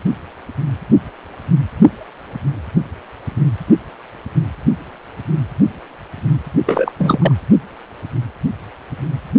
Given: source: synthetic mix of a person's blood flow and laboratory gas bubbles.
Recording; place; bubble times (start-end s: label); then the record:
Doppler ultrasound of blood flow; precordium
6.66-6.92 s: bubbles
6.98-7.18 s: bubbles
7.21-7.31 s: bubbles
From the record:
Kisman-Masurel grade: 213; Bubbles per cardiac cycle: several, 3 to 8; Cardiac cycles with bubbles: 1 to 10%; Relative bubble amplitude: loud (0.450 to 0.775); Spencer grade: 1 (occasional bubble signal discernible with the cardiac motion signal, with majority of cardiac periods free of bubbles); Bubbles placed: only in the low amplitude regions of the cardiac cycle